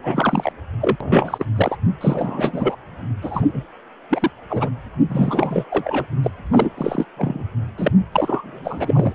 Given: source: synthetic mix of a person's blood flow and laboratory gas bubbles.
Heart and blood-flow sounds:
Doppler ultrasound of blood flow; precordium
0.03-0.52 s: bubbles
0.81-0.96 s: bubbles
1.00-1.46 s: bubbles
1.56-1.77 s: bubbles
2.00-2.75 s: bubbles
3.22-3.62 s: bubbles
4.10-4.30 s: bubbles
4.50-4.69 s: bubbles
5.09-5.64 s: bubbles
5.70-6.05 s: bubbles
6.22-6.30 s: bubbles
6.51-6.71 s: bubbles
6.77-7.05 s: bubbles
7.17-7.43 s: bubbles
7.78-7.92 s: bubbles
8.12-9.13 s: bubbles
From the record:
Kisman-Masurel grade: 342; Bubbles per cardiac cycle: rolling drumbeat, 9 or more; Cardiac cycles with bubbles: 100%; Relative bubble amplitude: moderate (0.250 to 0.450); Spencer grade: 3 (all of the cardiac periods contain showers or single bubble signals, but not dominating or overriding the cardiac motion signals); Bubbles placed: anywhere in the cardiac cycle

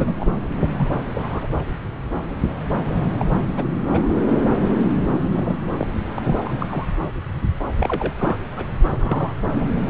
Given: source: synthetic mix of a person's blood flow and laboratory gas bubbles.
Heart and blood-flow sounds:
Doppler ultrasound of blood flow; subclavian vein
0.00-0.13 s: bubbles
0.19-0.33 s: bubbles
0.61-0.67 s: bubbles
0.77-0.88 s: bubbles
1.14-1.46 s: bubbles
3.19-3.25 s: bubbles
3.56-3.65 s: bubbles
3.92-4.12 s: bubbles
5.34-5.57 s: bubbles
5.79-5.88 s: bubbles
6.14-6.34 s: bubbles
6.42-6.67 s: bubbles
6.70-6.87 s: bubbles
7.79-8.12 s: bubbles
8.18-8.36 s: bubbles
8.57-8.66 s: bubbles
8.85-9.33 s: bubbles
9.56-9.65 s: bubbles
From the record:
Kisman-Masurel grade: 232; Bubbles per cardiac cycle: several, 3 to 8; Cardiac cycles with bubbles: 50 to 99%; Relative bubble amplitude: moderate (0.250 to 0.450); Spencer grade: 3 (all of the cardiac periods contain showers or single bubble signals, but not dominating or overriding the cardiac motion signals); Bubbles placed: anywhere in the cardiac cycle

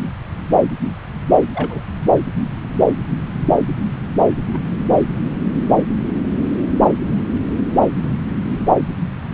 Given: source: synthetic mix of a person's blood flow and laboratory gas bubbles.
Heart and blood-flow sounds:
Doppler ultrasound of blood flow; subclavian vein
1.54-1.82 s: bubbles
4.52-4.58 s: bubbles
7.79-7.91 s: bubbles
8.00-8.12 s: bubbles
From the record:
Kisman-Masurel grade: 121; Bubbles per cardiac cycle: 1 to 2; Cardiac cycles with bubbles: 10 to 50%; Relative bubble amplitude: barely perceptible (0.100 to 0.250); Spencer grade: 2 (many but less than half of the cardiac periods contain bubble signals, singularly or in groups); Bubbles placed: anywhere in the cardiac cycle

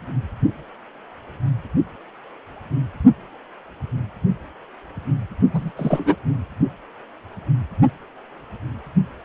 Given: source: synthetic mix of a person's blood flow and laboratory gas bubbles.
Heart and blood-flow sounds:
Doppler ultrasound of blood flow; precordium
5.54-5.71 s: bubbles
5.77-6.15 s: bubbles
From the record:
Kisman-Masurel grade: 213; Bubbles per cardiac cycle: several, 3 to 8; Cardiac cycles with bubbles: 1 to 10%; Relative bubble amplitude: loud (0.450 to 0.775); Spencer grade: 1 (occasional bubble signal discernible with the cardiac motion signal, with majority of cardiac periods free of bubbles); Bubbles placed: only in the low amplitude regions of the cardiac cycle

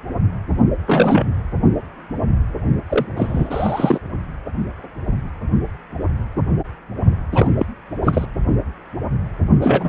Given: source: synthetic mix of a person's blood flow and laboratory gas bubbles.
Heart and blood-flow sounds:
Doppler ultrasound of blood flow; precordium
0.86-1.26 s: bubbles
2.89-3.06 s: bubbles
3.17-3.99 s: bubbles
7.32-7.47 s: bubbles
7.59-7.66 s: bubbles
8.02-8.26 s: bubbles
9.61-9.89 s: bubbles
From the record:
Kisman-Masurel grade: 223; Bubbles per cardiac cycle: several, 3 to 8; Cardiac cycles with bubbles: 10 to 50%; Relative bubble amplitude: loud (0.450 to 0.775); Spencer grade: 2 (many but less than half of the cardiac periods contain bubble signals, singularly or in groups); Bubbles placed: only in the low amplitude regions of the cardiac cycle

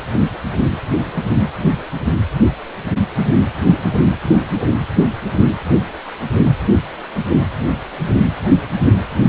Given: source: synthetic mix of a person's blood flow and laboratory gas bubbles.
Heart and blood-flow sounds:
Doppler ultrasound of blood flow; precordium
4.21-4.37 s: bubbles
From the record:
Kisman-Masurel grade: 111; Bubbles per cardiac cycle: 1 to 2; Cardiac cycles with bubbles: 1 to 10%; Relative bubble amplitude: barely perceptible (0.100 to 0.250); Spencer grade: 1 (occasional bubble signal discernible with the cardiac motion signal, with majority of cardiac periods free of bubbles); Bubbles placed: anywhere in the cardiac cycle

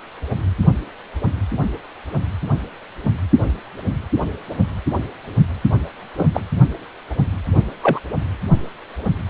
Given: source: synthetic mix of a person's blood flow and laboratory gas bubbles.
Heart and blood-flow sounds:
Doppler ultrasound of blood flow; precordium
6.17-6.26 s: bubbles
6.33-6.41 s: bubbles
7.83-8.00 s: bubbles
From the record:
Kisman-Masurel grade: 123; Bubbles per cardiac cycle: 1 to 2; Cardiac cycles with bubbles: 10 to 50%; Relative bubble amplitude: loud (0.450 to 0.775); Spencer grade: 2 (many but less than half of the cardiac periods contain bubble signals, singularly or in groups); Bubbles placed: only in the low amplitude regions of the cardiac cycle

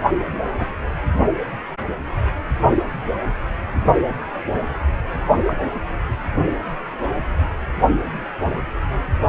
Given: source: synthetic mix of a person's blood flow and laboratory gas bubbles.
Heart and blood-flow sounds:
Doppler ultrasound of blood flow; precordium
0.58-0.66 s: bubbles
5.46-5.54 s: bubbles
From the record:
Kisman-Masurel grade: 122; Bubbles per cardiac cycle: 1 to 2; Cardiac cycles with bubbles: 10 to 50%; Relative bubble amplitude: moderate (0.250 to 0.450); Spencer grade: 2 (many but less than half of the cardiac periods contain bubble signals, singularly or in groups); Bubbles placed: only in the low amplitude regions of the cardiac cycle

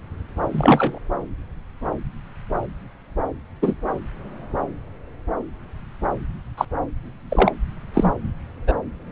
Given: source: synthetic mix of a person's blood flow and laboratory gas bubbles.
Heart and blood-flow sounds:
Doppler ultrasound of blood flow; subclavian vein
0.52-0.99 s: bubbles
3.62-3.74 s: bubbles
6.57-6.65 s: bubbles
7.30-7.51 s: bubbles
7.94-8.12 s: bubbles
8.67-8.73 s: bubbles
From the record:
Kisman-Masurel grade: 123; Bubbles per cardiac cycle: 1 to 2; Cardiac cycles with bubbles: 10 to 50%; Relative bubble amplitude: loud (0.450 to 0.775); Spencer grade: 2 (many but less than half of the cardiac periods contain bubble signals, singularly or in groups); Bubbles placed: anywhere in the cardiac cycle

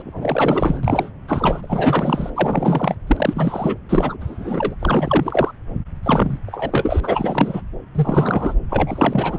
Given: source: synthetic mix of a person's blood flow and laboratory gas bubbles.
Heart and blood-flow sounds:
Doppler ultrasound of blood flow; subclavian vein
0.00-0.02 s: bubbles
0.04-1.10 s: bubbles
1.28-2.30 s: bubbles
2.35-2.95 s: bubbles
3.06-3.77 s: bubbles
3.89-4.17 s: bubbles
4.20-4.75 s: bubbles
4.79-5.51 s: bubbles
6.02-6.38 s: bubbles
6.46-7.61 s: bubbles
7.94-8.55 s: bubbles
8.70-9.38 s: bubbles
From the record:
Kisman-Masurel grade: 343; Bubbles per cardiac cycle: rolling drumbeat, 9 or more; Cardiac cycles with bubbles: 100%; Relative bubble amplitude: loud (0.450 to 0.775); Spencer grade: 3 (all of the cardiac periods contain showers or single bubble signals, but not dominating or overriding the cardiac motion signals); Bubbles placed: anywhere in the cardiac cycle

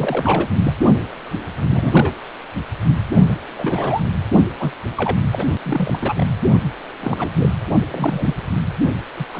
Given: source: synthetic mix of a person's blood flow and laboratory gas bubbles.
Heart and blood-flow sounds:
Doppler ultrasound of blood flow; precordium
0.00-0.48 s: bubbles
0.63-0.73 s: bubbles
1.71-2.15 s: bubbles
3.28-3.35 s: bubbles
3.56-4.03 s: bubbles
4.59-4.71 s: bubbles
4.96-5.16 s: bubbles
5.32-5.44 s: bubbles
5.63-6.25 s: bubbles
7.00-7.31 s: bubbles
7.35-7.54 s: bubbles
7.91-8.35 s: bubbles
9.16-9.26 s: bubbles
9.32-9.40 s: bubbles
From the record:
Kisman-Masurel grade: 242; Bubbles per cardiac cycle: several, 3 to 8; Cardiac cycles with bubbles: 100%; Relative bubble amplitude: moderate (0.250 to 0.450); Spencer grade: 3 (all of the cardiac periods contain showers or single bubble signals, but not dominating or overriding the cardiac motion signals); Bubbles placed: only in the low amplitude regions of the cardiac cycle

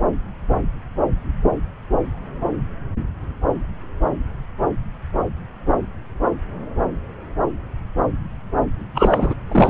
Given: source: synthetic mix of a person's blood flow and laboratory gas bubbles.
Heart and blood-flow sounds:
Doppler ultrasound of blood flow; subclavian vein
8.95-9.34 s: bubbles
9.52-9.70 s: bubbles
From the record:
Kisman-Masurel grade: 213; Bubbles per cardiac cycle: several, 3 to 8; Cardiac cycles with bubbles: 1 to 10%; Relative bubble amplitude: loud (0.450 to 0.775); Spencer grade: 1 (occasional bubble signal discernible with the cardiac motion signal, with majority of cardiac periods free of bubbles); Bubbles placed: anywhere in the cardiac cycle

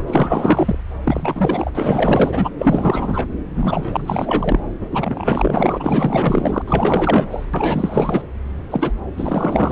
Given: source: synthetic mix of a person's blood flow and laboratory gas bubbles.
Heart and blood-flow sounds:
Doppler ultrasound of blood flow; subclavian vein
0.00-0.03 s: bubbles
0.07-0.78 s: bubbles
1.03-1.71 s: bubbles
1.74-2.49 s: bubbles
2.58-3.27 s: bubbles
3.55-4.61 s: bubbles
4.80-6.62 s: bubbles
6.67-7.28 s: bubbles
7.31-7.46 s: bubbles
7.54-8.22 s: bubbles
8.70-8.92 s: bubbles
9.17-9.72 s: bubbles
From the record:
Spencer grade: 4 (maximum detectable bubble signal sounding continuously throughout systole and diastole of every cardiac period, and overriding the amplitude of the normal cardiac signals); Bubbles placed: anywhere in the cardiac cycle

